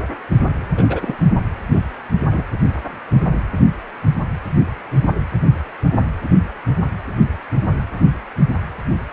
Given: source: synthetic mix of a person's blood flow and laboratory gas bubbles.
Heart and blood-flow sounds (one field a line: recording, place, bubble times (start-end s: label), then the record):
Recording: Doppler ultrasound of blood flow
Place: precordium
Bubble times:
0.77-1.16 s: bubbles
1.71-1.81 s: bubbles
2.32-2.44 s: bubbles
From the record:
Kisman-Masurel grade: 123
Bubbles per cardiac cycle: 1 to 2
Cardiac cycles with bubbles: 10 to 50%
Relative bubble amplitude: loud (0.450 to 0.775)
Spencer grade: 2 (many but less than half of the cardiac periods contain bubble signals, singularly or in groups)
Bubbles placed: anywhere in the cardiac cycle